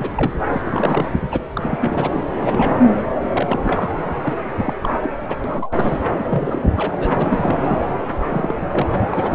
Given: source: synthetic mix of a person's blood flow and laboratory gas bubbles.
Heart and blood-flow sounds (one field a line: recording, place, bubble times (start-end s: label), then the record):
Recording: Doppler ultrasound of blood flow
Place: subclavian vein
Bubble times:
0.00-0.32 s: bubbles
0.50-1.26 s: bubbles
1.31-1.41 s: bubbles
1.56-2.23 s: bubbles
2.40-2.94 s: bubbles
2.97-3.03 s: bubbles
3.33-3.60 s: bubbles
3.63-3.90 s: bubbles
4.21-4.35 s: bubbles
4.56-4.74 s: bubbles
4.81-5.09 s: bubbles
5.28-5.36 s: bubbles
5.44-6.02 s: bubbles
6.30-6.67 s: bubbles
6.76-6.93 s: bubbles
7.00-7.77 s: bubbles
8.23-8.54 s: bubbles
8.59-8.92 s: bubbles
9.09-9.35 s: bubbles
From the record:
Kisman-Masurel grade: 342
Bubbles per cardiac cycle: rolling drumbeat, 9 or more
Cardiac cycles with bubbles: 100%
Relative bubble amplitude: moderate (0.250 to 0.450)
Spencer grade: 3 (all of the cardiac periods contain showers or single bubble signals, but not dominating or overriding the cardiac motion signals)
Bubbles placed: anywhere in the cardiac cycle